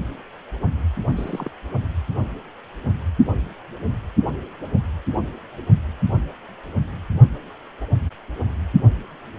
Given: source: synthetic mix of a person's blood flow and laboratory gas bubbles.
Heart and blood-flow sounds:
Doppler ultrasound of blood flow; precordium
1.15-1.51 s: bubbles
From the record:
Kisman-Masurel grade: 211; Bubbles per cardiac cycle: several, 3 to 8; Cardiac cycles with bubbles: 1 to 10%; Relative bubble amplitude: barely perceptible (0.100 to 0.250); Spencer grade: 1 (occasional bubble signal discernible with the cardiac motion signal, with majority of cardiac periods free of bubbles); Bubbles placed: anywhere in the cardiac cycle

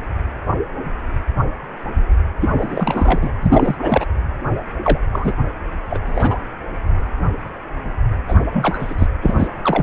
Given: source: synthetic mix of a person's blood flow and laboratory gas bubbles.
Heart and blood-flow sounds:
Doppler ultrasound of blood flow; precordium
2.40-2.50 s: bubbles
2.54-3.31 s: bubbles
3.42-4.05 s: bubbles
4.84-4.99 s: bubbles
5.12-5.33 s: bubbles
5.89-5.99 s: bubbles
6.06-6.34 s: bubbles
8.28-8.35 s: bubbles
8.53-8.95 s: bubbles
8.98-9.08 s: bubbles
9.22-9.48 s: bubbles
9.64-9.83 s: bubbles
From the record:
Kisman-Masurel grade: 222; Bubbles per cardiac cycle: several, 3 to 8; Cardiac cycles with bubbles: 10 to 50%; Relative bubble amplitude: moderate (0.250 to 0.450); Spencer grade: 2 (many but less than half of the cardiac periods contain bubble signals, singularly or in groups); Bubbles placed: anywhere in the cardiac cycle

